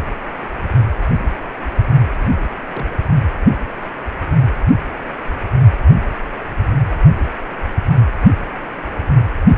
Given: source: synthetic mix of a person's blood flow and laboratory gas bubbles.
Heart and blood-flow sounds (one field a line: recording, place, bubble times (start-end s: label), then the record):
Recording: Doppler ultrasound of blood flow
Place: precordium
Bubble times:
2.15-2.44 s: bubbles
2.68-2.86 s: bubbles
From the record:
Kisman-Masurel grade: 121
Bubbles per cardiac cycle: 1 to 2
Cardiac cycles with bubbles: 10 to 50%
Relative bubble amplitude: barely perceptible (0.100 to 0.250)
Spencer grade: 2 (many but less than half of the cardiac periods contain bubble signals, singularly or in groups)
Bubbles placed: anywhere in the cardiac cycle